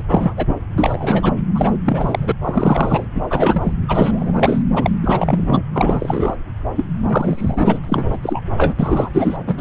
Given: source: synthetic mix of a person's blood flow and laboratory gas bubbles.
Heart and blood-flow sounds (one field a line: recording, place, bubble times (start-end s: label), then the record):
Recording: Doppler ultrasound of blood flow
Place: subclavian vein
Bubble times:
0.09-0.34 s: bubbles
0.37-0.56 s: bubbles
0.77-1.32 s: bubbles
1.54-1.71 s: bubbles
1.85-2.32 s: bubbles
2.43-3.04 s: bubbles
3.15-3.26 s: bubbles
3.30-3.73 s: bubbles
3.88-4.62 s: bubbles
4.75-4.91 s: bubbles
5.02-5.62 s: bubbles
5.73-6.36 s: bubbles
6.75-6.85 s: bubbles
7.03-7.79 s: bubbles
7.83-7.85 s: bubbles
7.88-8.07 s: bubbles
8.12-8.18 s: bubbles
8.21-8.43 s: bubbles
8.58-8.74 s: bubbles
8.79-9.10 s: bubbles
9.14-9.38 s: bubbles
9.47-9.61 s: bubbles
From the record:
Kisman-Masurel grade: 343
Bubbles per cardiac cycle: rolling drumbeat, 9 or more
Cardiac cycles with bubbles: 100%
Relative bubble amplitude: loud (0.450 to 0.775)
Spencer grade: 3 (all of the cardiac periods contain showers or single bubble signals, but not dominating or overriding the cardiac motion signals)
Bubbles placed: anywhere in the cardiac cycle